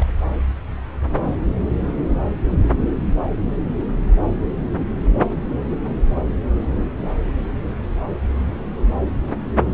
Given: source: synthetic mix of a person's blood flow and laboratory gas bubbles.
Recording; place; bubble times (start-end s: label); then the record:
Doppler ultrasound of blood flow; subclavian vein
0.00-0.05 s: bubbles
From the record:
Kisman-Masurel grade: 211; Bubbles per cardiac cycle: several, 3 to 8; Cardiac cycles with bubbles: 1 to 10%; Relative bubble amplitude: barely perceptible (0.100 to 0.250); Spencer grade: 1 (occasional bubble signal discernible with the cardiac motion signal, with majority of cardiac periods free of bubbles); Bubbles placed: anywhere in the cardiac cycle